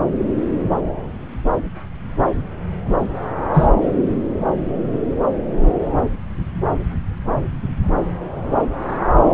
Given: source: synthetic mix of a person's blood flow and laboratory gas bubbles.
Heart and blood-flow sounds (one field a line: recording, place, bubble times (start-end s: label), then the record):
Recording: Doppler ultrasound of blood flow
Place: subclavian vein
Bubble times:
3.54-3.67 s: bubbles
From the record:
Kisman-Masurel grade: 113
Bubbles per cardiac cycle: 1 to 2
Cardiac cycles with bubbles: 1 to 10%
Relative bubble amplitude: loud (0.450 to 0.775)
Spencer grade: 1 (occasional bubble signal discernible with the cardiac motion signal, with majority of cardiac periods free of bubbles)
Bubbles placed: anywhere in the cardiac cycle